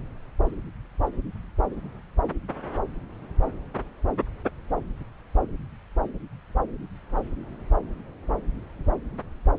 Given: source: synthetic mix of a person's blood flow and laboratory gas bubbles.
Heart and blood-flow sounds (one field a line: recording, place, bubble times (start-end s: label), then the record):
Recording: Doppler ultrasound of blood flow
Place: subclavian vein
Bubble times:
no bubbles
From the record:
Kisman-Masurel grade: 000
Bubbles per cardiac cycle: 0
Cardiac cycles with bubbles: 0%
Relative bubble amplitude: no bubbles discernible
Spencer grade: 0 (complete lack of bubble signals)